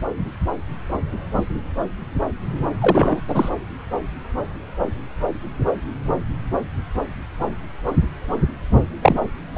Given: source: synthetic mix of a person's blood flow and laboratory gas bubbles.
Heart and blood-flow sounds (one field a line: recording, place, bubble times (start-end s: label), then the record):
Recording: Doppler ultrasound of blood flow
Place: subclavian vein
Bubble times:
2.81-3.21 s: bubbles
3.28-3.49 s: bubbles
9.01-9.19 s: bubbles
9.53-9.58 s: bubbles
From the record:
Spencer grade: 2 (many but less than half of the cardiac periods contain bubble signals, singularly or in groups)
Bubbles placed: anywhere in the cardiac cycle